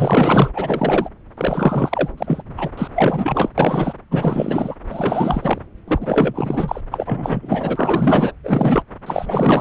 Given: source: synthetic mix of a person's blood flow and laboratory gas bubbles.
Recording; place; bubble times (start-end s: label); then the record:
Doppler ultrasound of blood flow; subclavian vein
0.00-0.50 s: bubbles
0.54-1.10 s: bubbles
1.37-2.08 s: bubbles
2.17-2.42 s: bubbles
2.57-2.69 s: bubbles
2.77-2.88 s: bubbles
2.95-3.50 s: bubbles
3.58-3.93 s: bubbles
4.11-4.76 s: bubbles
4.89-5.58 s: bubbles
5.88-6.81 s: bubbles
6.91-8.32 s: bubbles
8.44-8.82 s: bubbles
9.06-9.61 s: bubbles
From the record:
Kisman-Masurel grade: 444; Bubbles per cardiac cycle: continuous sound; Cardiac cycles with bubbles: 100%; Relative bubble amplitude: maximal (0.775 to 0.999); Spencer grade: 4 (maximum detectable bubble signal sounding continuously throughout systole and diastole of every cardiac period, and overriding the amplitude of the normal cardiac signals); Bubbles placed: anywhere in the cardiac cycle